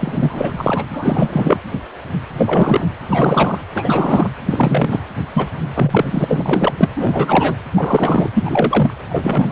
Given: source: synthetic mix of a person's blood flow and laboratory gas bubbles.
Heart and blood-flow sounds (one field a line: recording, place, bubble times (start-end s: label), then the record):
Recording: Doppler ultrasound of blood flow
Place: precordium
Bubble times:
0.00-0.53 s: bubbles
0.57-0.82 s: bubbles
0.90-1.60 s: bubbles
2.33-2.88 s: bubbles
3.09-3.60 s: bubbles
3.74-4.32 s: bubbles
4.45-5.00 s: bubbles
5.33-5.49 s: bubbles
5.75-6.25 s: bubbles
6.28-6.74 s: bubbles
6.77-6.89 s: bubbles
6.96-7.57 s: bubbles
7.75-8.30 s: bubbles
8.35-8.94 s: bubbles
9.09-9.52 s: bubbles
From the record:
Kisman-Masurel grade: 333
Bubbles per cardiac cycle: rolling drumbeat, 9 or more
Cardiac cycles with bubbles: 50 to 99%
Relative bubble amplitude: loud (0.450 to 0.775)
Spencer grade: 3 (all of the cardiac periods contain showers or single bubble signals, but not dominating or overriding the cardiac motion signals)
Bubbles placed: anywhere in the cardiac cycle